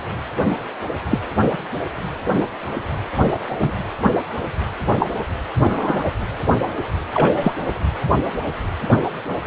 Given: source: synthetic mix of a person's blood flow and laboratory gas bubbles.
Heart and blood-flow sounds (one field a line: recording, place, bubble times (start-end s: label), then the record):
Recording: Doppler ultrasound of blood flow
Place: precordium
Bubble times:
1.10-1.19 s: bubbles
3.58-3.72 s: bubbles
4.99-5.08 s: bubbles
5.64-6.04 s: bubbles
7.13-7.53 s: bubbles
From the record:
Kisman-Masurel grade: 123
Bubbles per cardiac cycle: 1 to 2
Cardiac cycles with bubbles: 10 to 50%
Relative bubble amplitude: loud (0.450 to 0.775)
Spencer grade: 2 (many but less than half of the cardiac periods contain bubble signals, singularly or in groups)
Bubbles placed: anywhere in the cardiac cycle